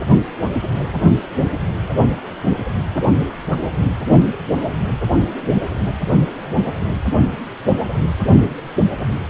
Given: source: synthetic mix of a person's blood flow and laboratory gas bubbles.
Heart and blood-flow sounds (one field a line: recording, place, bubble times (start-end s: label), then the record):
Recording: Doppler ultrasound of blood flow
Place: precordium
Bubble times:
no bubbles
From the record:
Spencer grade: 0 (complete lack of bubble signals)